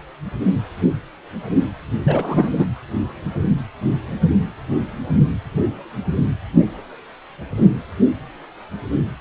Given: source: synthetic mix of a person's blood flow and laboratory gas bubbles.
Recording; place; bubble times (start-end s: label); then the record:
Doppler ultrasound of blood flow; precordium
2.03-2.49 s: bubbles
2.58-2.66 s: bubbles
From the record:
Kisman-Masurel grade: 223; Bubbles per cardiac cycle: several, 3 to 8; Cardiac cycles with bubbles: 10 to 50%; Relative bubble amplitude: loud (0.450 to 0.775); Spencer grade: 2 (many but less than half of the cardiac periods contain bubble signals, singularly or in groups); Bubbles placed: anywhere in the cardiac cycle